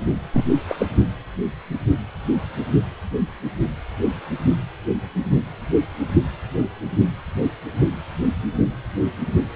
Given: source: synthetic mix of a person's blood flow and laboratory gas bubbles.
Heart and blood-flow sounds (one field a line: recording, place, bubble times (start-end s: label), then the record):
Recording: Doppler ultrasound of blood flow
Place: precordium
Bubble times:
0.33-0.44 s: bubbles
0.69-0.76 s: bubbles
0.79-0.86 s: bubbles
From the record:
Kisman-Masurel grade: 222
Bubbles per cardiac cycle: several, 3 to 8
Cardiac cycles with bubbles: 10 to 50%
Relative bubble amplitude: moderate (0.250 to 0.450)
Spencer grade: 2 (many but less than half of the cardiac periods contain bubble signals, singularly or in groups)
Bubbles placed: only in the low amplitude regions of the cardiac cycle